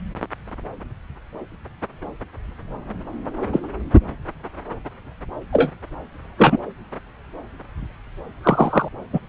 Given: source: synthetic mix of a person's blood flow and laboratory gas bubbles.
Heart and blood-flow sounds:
Doppler ultrasound of blood flow; subclavian vein
3.52-3.60 s: bubbles
5.53-5.70 s: bubbles
6.38-6.58 s: bubbles
8.43-8.88 s: bubbles
9.13-9.20 s: bubbles
From the record:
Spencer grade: 2 (many but less than half of the cardiac periods contain bubble signals, singularly or in groups); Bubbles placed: anywhere in the cardiac cycle

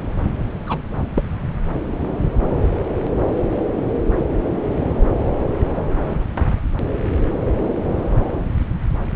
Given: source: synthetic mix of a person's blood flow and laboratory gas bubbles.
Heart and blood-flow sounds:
Doppler ultrasound of blood flow; subclavian vein
0.66-0.78 s: bubbles
1.14-1.23 s: bubbles
From the record:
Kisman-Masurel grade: 112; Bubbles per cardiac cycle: 1 to 2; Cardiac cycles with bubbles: 1 to 10%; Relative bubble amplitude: moderate (0.250 to 0.450); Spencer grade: 1 (occasional bubble signal discernible with the cardiac motion signal, with majority of cardiac periods free of bubbles); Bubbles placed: anywhere in the cardiac cycle

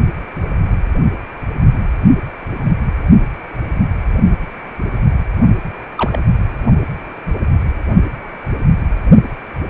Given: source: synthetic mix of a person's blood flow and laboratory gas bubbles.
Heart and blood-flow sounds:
Doppler ultrasound of blood flow; precordium
5.96-6.22 s: bubbles
From the record:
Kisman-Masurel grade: 112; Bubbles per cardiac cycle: 1 to 2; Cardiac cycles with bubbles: 1 to 10%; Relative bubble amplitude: moderate (0.250 to 0.450); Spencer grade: 1 (occasional bubble signal discernible with the cardiac motion signal, with majority of cardiac periods free of bubbles); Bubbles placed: only in the low amplitude regions of the cardiac cycle

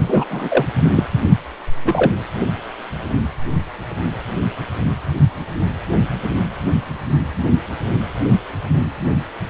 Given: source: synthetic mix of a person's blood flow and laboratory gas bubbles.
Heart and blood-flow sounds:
Doppler ultrasound of blood flow; precordium
0.00-0.26 s: bubbles
0.30-0.66 s: bubbles
0.96-1.03 s: bubbles
1.84-2.13 s: bubbles
From the record:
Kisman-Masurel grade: 223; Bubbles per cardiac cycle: several, 3 to 8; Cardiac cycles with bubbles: 10 to 50%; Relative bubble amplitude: loud (0.450 to 0.775); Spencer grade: 2 (many but less than half of the cardiac periods contain bubble signals, singularly or in groups); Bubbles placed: anywhere in the cardiac cycle

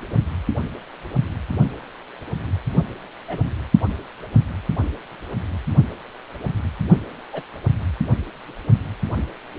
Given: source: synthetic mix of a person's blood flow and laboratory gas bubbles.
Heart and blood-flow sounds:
Doppler ultrasound of blood flow; precordium
0.10-0.17 s: bubbles
3.28-3.43 s: bubbles
7.32-7.43 s: bubbles
From the record:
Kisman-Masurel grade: 121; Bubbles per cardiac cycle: 1 to 2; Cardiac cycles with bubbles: 10 to 50%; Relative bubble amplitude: barely perceptible (0.100 to 0.250); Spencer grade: 2 (many but less than half of the cardiac periods contain bubble signals, singularly or in groups); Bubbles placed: only in the low amplitude regions of the cardiac cycle

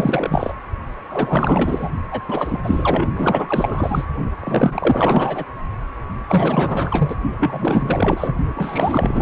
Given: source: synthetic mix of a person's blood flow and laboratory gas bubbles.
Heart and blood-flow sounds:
Doppler ultrasound of blood flow; precordium
0.00-0.54 s: bubbles
1.09-1.89 s: bubbles
2.11-2.21 s: bubbles
2.28-3.06 s: bubbles
3.15-4.05 s: bubbles
4.41-5.44 s: bubbles
6.28-7.16 s: bubbles
7.38-8.36 s: bubbles
8.55-9.22 s: bubbles
From the record:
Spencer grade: 4 (maximum detectable bubble signal sounding continuously throughout systole and diastole of every cardiac period, and overriding the amplitude of the normal cardiac signals); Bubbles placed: only in the low amplitude regions of the cardiac cycle

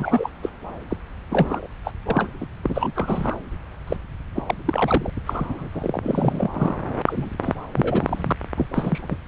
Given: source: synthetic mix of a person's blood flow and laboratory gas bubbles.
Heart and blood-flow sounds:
Doppler ultrasound of blood flow; subclavian vein
0.00-0.30 s: bubbles
0.42-0.50 s: bubbles
0.90-0.97 s: bubbles
1.31-1.67 s: bubbles
1.85-1.91 s: bubbles
2.06-2.28 s: bubbles
2.41-2.46 s: bubbles
2.63-2.93 s: bubbles
2.96-3.39 s: bubbles
3.87-3.97 s: bubbles
4.34-4.42 s: bubbles
4.48-4.54 s: bubbles
4.65-5.10 s: bubbles
5.26-5.46 s: bubbles
5.48-5.68 s: bubbles
5.72-6.48 s: bubbles
6.53-6.77 s: bubbles
7.05-7.29 s: bubbles
7.44-7.57 s: bubbles
7.75-8.36 s: bubbles
8.56-8.66 s: bubbles
8.74-9.17 s: bubbles
From the record:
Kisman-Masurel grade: 342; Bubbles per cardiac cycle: rolling drumbeat, 9 or more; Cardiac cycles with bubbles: 100%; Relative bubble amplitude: moderate (0.250 to 0.450); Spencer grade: 3 (all of the cardiac periods contain showers or single bubble signals, but not dominating or overriding the cardiac motion signals); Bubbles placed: anywhere in the cardiac cycle

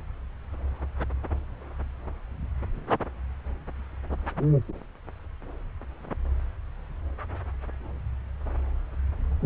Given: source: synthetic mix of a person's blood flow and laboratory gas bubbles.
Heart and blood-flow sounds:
Doppler ultrasound of blood flow; subclavian vein
no bubbles
From the record:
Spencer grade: 0 (complete lack of bubble signals)

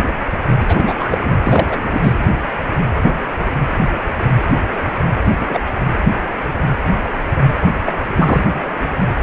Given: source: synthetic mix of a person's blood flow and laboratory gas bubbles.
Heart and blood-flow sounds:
Doppler ultrasound of blood flow; precordium
0.59-0.93 s: bubbles
0.98-1.18 s: bubbles
1.40-1.80 s: bubbles
1.83-2.15 s: bubbles
5.24-5.32 s: bubbles
5.40-5.60 s: bubbles
7.85-7.93 s: bubbles
8.16-8.46 s: bubbles
From the record:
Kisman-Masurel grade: 223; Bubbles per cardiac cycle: several, 3 to 8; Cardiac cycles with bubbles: 10 to 50%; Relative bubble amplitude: loud (0.450 to 0.775); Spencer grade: 2 (many but less than half of the cardiac periods contain bubble signals, singularly or in groups); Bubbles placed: anywhere in the cardiac cycle

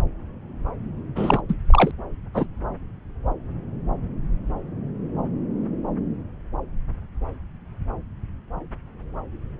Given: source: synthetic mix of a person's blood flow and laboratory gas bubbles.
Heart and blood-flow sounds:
Doppler ultrasound of blood flow; subclavian vein
1.16-1.41 s: bubbles
1.48-1.54 s: bubbles
1.70-1.91 s: bubbles
2.34-2.47 s: bubbles
From the record:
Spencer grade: 1 (occasional bubble signal discernible with the cardiac motion signal, with majority of cardiac periods free of bubbles); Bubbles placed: anywhere in the cardiac cycle

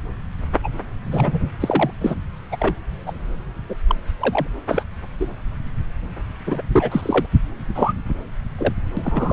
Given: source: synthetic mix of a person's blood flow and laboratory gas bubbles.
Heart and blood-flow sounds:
Doppler ultrasound of blood flow; subclavian vein
0.63-0.69 s: bubbles
1.11-1.40 s: bubbles
1.60-1.90 s: bubbles
2.00-2.15 s: bubbles
2.51-2.56 s: bubbles
2.60-2.74 s: bubbles
3.06-3.13 s: bubbles
3.69-3.75 s: bubbles
3.87-3.96 s: bubbles
4.20-4.47 s: bubbles
4.68-4.83 s: bubbles
5.20-5.27 s: bubbles
6.46-6.62 s: bubbles
6.72-7.26 s: bubbles
7.74-7.93 s: bubbles
8.09-8.14 s: bubbles
8.58-8.73 s: bubbles
8.96-9.33 s: bubbles
From the record:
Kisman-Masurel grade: 232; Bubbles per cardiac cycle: several, 3 to 8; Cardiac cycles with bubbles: 50 to 99%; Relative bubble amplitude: moderate (0.250 to 0.450); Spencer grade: 3 (all of the cardiac periods contain showers or single bubble signals, but not dominating or overriding the cardiac motion signals); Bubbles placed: anywhere in the cardiac cycle

